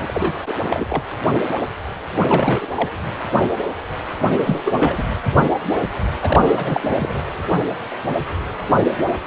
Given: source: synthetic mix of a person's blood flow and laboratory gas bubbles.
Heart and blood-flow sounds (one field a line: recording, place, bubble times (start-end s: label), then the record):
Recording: Doppler ultrasound of blood flow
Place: precordium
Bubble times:
0.00-0.54 s: bubbles
0.70-0.87 s: bubbles
0.89-1.03 s: bubbles
2.27-2.66 s: bubbles
2.75-2.90 s: bubbles
4.42-4.62 s: bubbles
4.65-5.03 s: bubbles
6.21-6.84 s: bubbles
6.98-7.22 s: bubbles
From the record:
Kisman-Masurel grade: 333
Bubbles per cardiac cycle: rolling drumbeat, 9 or more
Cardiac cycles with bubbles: 50 to 99%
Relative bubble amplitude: loud (0.450 to 0.775)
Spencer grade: 3 (all of the cardiac periods contain showers or single bubble signals, but not dominating or overriding the cardiac motion signals)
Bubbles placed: anywhere in the cardiac cycle